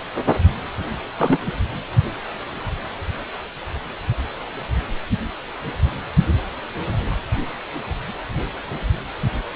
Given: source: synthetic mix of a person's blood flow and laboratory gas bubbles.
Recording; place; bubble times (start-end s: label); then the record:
Doppler ultrasound of blood flow; precordium
1.17-1.38 s: bubbles
1.46-1.52 s: bubbles
From the record:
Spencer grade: 1 (occasional bubble signal discernible with the cardiac motion signal, with majority of cardiac periods free of bubbles); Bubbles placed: anywhere in the cardiac cycle